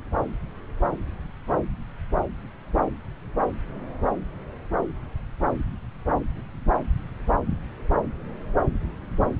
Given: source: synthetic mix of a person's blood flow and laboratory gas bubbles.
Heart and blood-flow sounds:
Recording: Doppler ultrasound of blood flow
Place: subclavian vein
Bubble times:
no bubbles
From the record:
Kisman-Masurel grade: 000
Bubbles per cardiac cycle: 0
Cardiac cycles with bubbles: 0%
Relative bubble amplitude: no bubbles discernible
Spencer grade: 0 (complete lack of bubble signals)

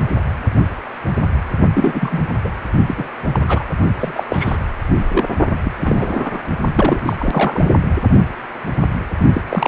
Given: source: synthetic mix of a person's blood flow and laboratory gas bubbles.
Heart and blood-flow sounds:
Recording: Doppler ultrasound of blood flow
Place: precordium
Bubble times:
1.73-2.23 s: bubbles
2.44-2.49 s: bubbles
2.88-2.94 s: bubbles
2.97-3.09 s: bubbles
3.33-3.40 s: bubbles
3.48-3.64 s: bubbles
3.99-4.23 s: bubbles
4.29-4.57 s: bubbles
4.95-5.27 s: bubbles
5.64-5.72 s: bubbles
5.81-6.42 s: bubbles
6.75-7.67 s: bubbles
9.33-9.42 s: bubbles
9.49-9.68 s: bubbles
From the record:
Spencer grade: 3 (all of the cardiac periods contain showers or single bubble signals, but not dominating or overriding the cardiac motion signals)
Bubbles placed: only in the low amplitude regions of the cardiac cycle

